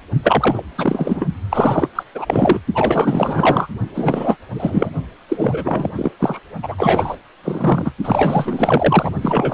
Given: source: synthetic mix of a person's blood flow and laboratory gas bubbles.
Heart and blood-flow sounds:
Doppler ultrasound of blood flow; precordium
0.23-0.62 s: bubbles
0.76-1.26 s: bubbles
1.50-1.89 s: bubbles
1.95-2.03 s: bubbles
2.15-2.60 s: bubbles
2.74-3.68 s: bubbles
3.94-4.37 s: bubbles
4.54-4.90 s: bubbles
5.28-5.91 s: bubbles
5.94-6.12 s: bubbles
6.20-6.40 s: bubbles
6.62-7.17 s: bubbles
7.44-7.92 s: bubbles
8.04-9.11 s: bubbles
9.21-9.54 s: bubbles
From the record:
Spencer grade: 4 (maximum detectable bubble signal sounding continuously throughout systole and diastole of every cardiac period, and overriding the amplitude of the normal cardiac signals); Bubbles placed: only in the low amplitude regions of the cardiac cycle

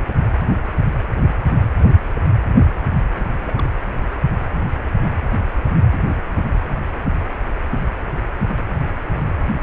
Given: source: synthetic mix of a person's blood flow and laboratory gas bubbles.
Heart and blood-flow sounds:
Doppler ultrasound of blood flow; precordium
3.15-3.25 s: bubbles
3.32-3.75 s: bubbles
From the record:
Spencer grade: 1 (occasional bubble signal discernible with the cardiac motion signal, with majority of cardiac periods free of bubbles); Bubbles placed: anywhere in the cardiac cycle

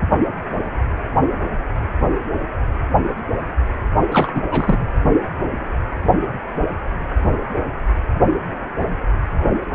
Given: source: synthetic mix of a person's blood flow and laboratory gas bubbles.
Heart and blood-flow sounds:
Doppler ultrasound of blood flow; precordium
4.11-4.42 s: bubbles
4.50-4.92 s: bubbles
From the record:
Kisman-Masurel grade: 222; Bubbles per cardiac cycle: several, 3 to 8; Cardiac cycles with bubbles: 10 to 50%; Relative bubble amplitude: moderate (0.250 to 0.450); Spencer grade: 2 (many but less than half of the cardiac periods contain bubble signals, singularly or in groups); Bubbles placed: only in the low amplitude regions of the cardiac cycle

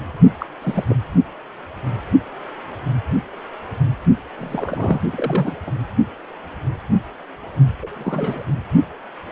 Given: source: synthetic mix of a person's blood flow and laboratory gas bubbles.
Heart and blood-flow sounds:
Doppler ultrasound of blood flow; precordium
0.38-0.46 s: bubbles
0.61-0.84 s: bubbles
0.87-0.96 s: bubbles
4.38-5.01 s: bubbles
5.12-5.56 s: bubbles
5.67-5.71 s: bubbles
7.82-7.88 s: bubbles
7.94-8.45 s: bubbles
From the record:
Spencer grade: 2 (many but less than half of the cardiac periods contain bubble signals, singularly or in groups); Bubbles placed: only in the low amplitude regions of the cardiac cycle

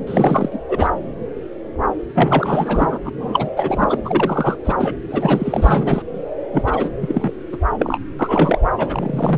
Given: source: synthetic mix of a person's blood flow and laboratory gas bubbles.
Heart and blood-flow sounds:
Doppler ultrasound of blood flow; subclavian vein
0.07-0.59 s: bubbles
0.68-0.90 s: bubbles
2.15-2.98 s: bubbles
3.04-3.09 s: bubbles
3.18-3.50 s: bubbles
3.56-3.98 s: bubbles
4.04-4.56 s: bubbles
4.64-4.74 s: bubbles
4.79-4.96 s: bubbles
5.10-6.02 s: bubbles
6.52-6.91 s: bubbles
7.01-7.31 s: bubbles
7.52-7.57 s: bubbles
7.79-7.98 s: bubbles
8.19-8.59 s: bubbles
8.78-9.38 s: bubbles
From the record:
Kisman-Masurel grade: 332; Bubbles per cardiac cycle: rolling drumbeat, 9 or more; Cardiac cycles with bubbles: 50 to 99%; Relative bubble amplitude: moderate (0.250 to 0.450); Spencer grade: 3 (all of the cardiac periods contain showers or single bubble signals, but not dominating or overriding the cardiac motion signals); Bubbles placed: anywhere in the cardiac cycle

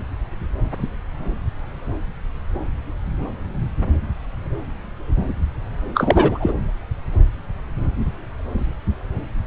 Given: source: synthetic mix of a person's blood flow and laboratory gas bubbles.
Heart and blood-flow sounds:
Doppler ultrasound of blood flow; subclavian vein
5.94-6.53 s: bubbles
From the record:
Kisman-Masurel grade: 213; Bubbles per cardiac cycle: several, 3 to 8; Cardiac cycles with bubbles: 1 to 10%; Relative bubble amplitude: loud (0.450 to 0.775); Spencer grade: 1 (occasional bubble signal discernible with the cardiac motion signal, with majority of cardiac periods free of bubbles); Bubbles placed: anywhere in the cardiac cycle

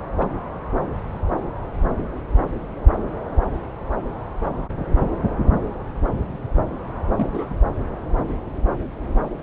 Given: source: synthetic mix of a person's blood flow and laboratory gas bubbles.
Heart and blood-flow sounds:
Doppler ultrasound of blood flow; subclavian vein
0.19-0.29 s: bubbles
7.17-7.49 s: bubbles
From the record:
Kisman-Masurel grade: 111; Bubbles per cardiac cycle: 1 to 2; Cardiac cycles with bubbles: 1 to 10%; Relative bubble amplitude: barely perceptible (0.100 to 0.250); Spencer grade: 1 (occasional bubble signal discernible with the cardiac motion signal, with majority of cardiac periods free of bubbles); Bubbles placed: anywhere in the cardiac cycle

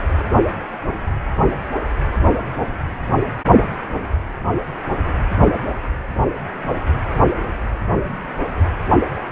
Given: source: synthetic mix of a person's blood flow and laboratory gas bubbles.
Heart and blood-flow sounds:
Doppler ultrasound of blood flow; precordium
no bubbles
From the record:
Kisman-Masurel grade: 000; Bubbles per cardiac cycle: 0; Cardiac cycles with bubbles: 0%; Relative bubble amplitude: no bubbles discernible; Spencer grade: 0 (complete lack of bubble signals)

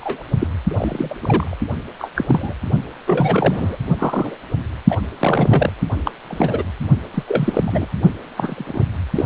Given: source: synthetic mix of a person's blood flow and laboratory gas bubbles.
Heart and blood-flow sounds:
Doppler ultrasound of blood flow; precordium
0.00-0.23 s: bubbles
0.40-0.47 s: bubbles
0.68-1.16 s: bubbles
1.21-1.55 s: bubbles
1.98-2.10 s: bubbles
2.15-2.54 s: bubbles
3.06-3.78 s: bubbles
3.97-4.37 s: bubbles
4.89-4.96 s: bubbles
5.20-5.72 s: bubbles
5.81-5.87 s: bubbles
6.05-6.11 s: bubbles
6.29-6.63 s: bubbles
7.14-7.24 s: bubbles
7.28-7.87 s: bubbles
8.36-8.84 s: bubbles
9.15-9.25 s: bubbles
From the record:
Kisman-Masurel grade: 242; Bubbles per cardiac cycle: several, 3 to 8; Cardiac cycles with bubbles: 100%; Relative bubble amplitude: moderate (0.250 to 0.450); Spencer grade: 3 (all of the cardiac periods contain showers or single bubble signals, but not dominating or overriding the cardiac motion signals); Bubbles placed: only in the low amplitude regions of the cardiac cycle

